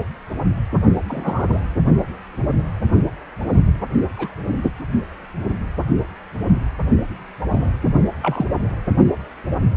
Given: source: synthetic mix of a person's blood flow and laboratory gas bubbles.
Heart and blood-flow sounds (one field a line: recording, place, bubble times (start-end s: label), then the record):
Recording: Doppler ultrasound of blood flow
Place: precordium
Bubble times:
1.07-1.61 s: bubbles
4.16-4.34 s: bubbles
7.50-7.72 s: bubbles
8.22-8.47 s: bubbles
From the record:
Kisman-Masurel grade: 122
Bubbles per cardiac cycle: 1 to 2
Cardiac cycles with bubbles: 10 to 50%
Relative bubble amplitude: moderate (0.250 to 0.450)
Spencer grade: 2 (many but less than half of the cardiac periods contain bubble signals, singularly or in groups)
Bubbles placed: only in the low amplitude regions of the cardiac cycle